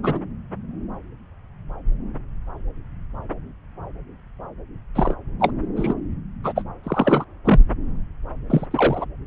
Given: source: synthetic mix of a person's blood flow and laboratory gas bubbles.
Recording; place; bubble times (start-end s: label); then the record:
Doppler ultrasound of blood flow; subclavian vein
0.03-0.19 s: bubbles
4.95-5.15 s: bubbles
5.39-5.51 s: bubbles
5.76-5.93 s: bubbles
6.43-6.63 s: bubbles
6.83-7.24 s: bubbles
7.44-7.60 s: bubbles
8.49-8.66 s: bubbles
8.71-9.05 s: bubbles
From the record:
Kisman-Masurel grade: 233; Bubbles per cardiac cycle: several, 3 to 8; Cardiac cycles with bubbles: 50 to 99%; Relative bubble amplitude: loud (0.450 to 0.775); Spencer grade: 3 (all of the cardiac periods contain showers or single bubble signals, but not dominating or overriding the cardiac motion signals); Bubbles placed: anywhere in the cardiac cycle